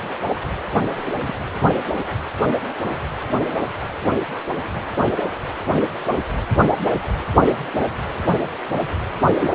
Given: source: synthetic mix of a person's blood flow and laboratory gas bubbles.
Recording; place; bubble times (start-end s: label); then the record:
Doppler ultrasound of blood flow; precordium
0.95-1.17 s: bubbles
1.25-1.33 s: bubbles
9.38-9.49 s: bubbles
9.52-9.55 s: bubbles
From the record:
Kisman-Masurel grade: 122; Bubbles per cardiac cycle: 1 to 2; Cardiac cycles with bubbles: 10 to 50%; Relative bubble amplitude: moderate (0.250 to 0.450); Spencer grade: 2 (many but less than half of the cardiac periods contain bubble signals, singularly or in groups); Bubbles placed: anywhere in the cardiac cycle